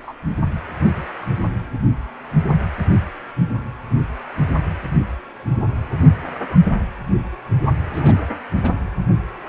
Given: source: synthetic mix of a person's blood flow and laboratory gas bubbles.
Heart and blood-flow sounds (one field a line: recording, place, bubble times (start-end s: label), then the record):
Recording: Doppler ultrasound of blood flow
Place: precordium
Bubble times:
0.02-0.14 s: bubbles
6.49-6.57 s: bubbles
7.89-8.14 s: bubbles
8.62-8.72 s: bubbles
From the record:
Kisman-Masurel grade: 121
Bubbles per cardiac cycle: 1 to 2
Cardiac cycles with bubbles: 10 to 50%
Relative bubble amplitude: barely perceptible (0.100 to 0.250)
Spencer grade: 2 (many but less than half of the cardiac periods contain bubble signals, singularly or in groups)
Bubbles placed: anywhere in the cardiac cycle